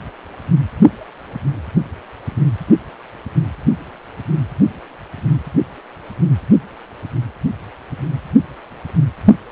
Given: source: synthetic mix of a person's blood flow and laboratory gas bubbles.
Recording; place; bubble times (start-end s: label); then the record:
Doppler ultrasound of blood flow; precordium
no bubbles
From the record:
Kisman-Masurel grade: 000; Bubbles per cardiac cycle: 0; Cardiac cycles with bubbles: 0%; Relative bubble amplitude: no bubbles discernible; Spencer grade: 0 (complete lack of bubble signals)